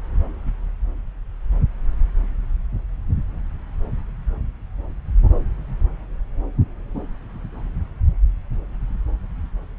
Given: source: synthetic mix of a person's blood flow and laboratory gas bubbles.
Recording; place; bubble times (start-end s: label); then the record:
Doppler ultrasound of blood flow; subclavian vein
no bubbles
From the record:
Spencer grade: 0 (complete lack of bubble signals)